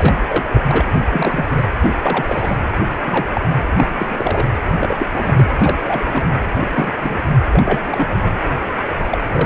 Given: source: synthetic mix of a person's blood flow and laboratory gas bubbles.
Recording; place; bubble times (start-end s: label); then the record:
Doppler ultrasound of blood flow; precordium
0.00-0.13 s: bubbles
0.28-0.60 s: bubbles
0.68-0.83 s: bubbles
1.11-1.64 s: bubbles
1.82-1.95 s: bubbles
2.04-2.24 s: bubbles
2.26-2.57 s: bubbles
3.03-3.45 s: bubbles
3.76-3.85 s: bubbles
3.97-4.45 s: bubbles
4.79-4.95 s: bubbles
4.98-5.06 s: bubbles
5.13-5.44 s: bubbles
5.58-5.76 s: bubbles
5.85-6.05 s: bubbles
6.13-6.25 s: bubbles
6.60-6.92 s: bubbles
7.00-7.19 s: bubbles
7.53-7.81 s: bubbles
7.86-8.38 s: bubbles
8.56-8.62 s: bubbles
9.10-9.18 s: bubbles
9.32-9.46 s: bubbles
From the record:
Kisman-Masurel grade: 242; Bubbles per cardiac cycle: several, 3 to 8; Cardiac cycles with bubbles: 100%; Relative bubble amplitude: moderate (0.250 to 0.450); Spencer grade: 3 (all of the cardiac periods contain showers or single bubble signals, but not dominating or overriding the cardiac motion signals); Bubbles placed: anywhere in the cardiac cycle